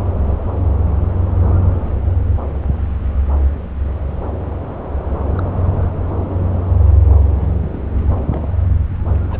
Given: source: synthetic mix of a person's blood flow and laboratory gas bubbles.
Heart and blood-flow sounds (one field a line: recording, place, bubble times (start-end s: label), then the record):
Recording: Doppler ultrasound of blood flow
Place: subclavian vein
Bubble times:
5.37-5.42 s: bubbles
5.74-5.80 s: bubbles
7.41-7.82 s: bubbles
8.31-8.42 s: bubbles
9.30-9.40 s: bubbles
From the record:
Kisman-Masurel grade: 121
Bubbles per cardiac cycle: 1 to 2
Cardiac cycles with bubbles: 10 to 50%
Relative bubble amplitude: barely perceptible (0.100 to 0.250)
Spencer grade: 2 (many but less than half of the cardiac periods contain bubble signals, singularly or in groups)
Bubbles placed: anywhere in the cardiac cycle